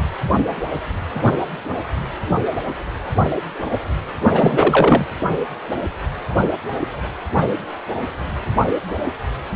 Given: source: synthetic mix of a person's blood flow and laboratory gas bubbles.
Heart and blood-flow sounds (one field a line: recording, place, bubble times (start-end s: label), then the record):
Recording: Doppler ultrasound of blood flow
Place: precordium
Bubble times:
4.31-5.05 s: bubbles
From the record:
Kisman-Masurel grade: 213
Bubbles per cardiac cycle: several, 3 to 8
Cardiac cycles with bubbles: 1 to 10%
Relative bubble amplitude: loud (0.450 to 0.775)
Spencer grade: 1 (occasional bubble signal discernible with the cardiac motion signal, with majority of cardiac periods free of bubbles)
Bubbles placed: only in the low amplitude regions of the cardiac cycle